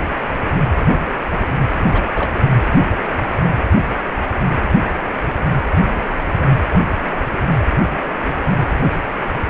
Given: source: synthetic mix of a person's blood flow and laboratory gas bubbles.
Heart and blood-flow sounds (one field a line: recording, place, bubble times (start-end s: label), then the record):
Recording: Doppler ultrasound of blood flow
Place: precordium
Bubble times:
1.88-2.02 s: bubbles
2.15-2.32 s: bubbles
From the record:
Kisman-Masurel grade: 222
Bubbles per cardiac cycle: several, 3 to 8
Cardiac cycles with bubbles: 10 to 50%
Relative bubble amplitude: moderate (0.250 to 0.450)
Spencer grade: 2 (many but less than half of the cardiac periods contain bubble signals, singularly or in groups)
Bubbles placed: anywhere in the cardiac cycle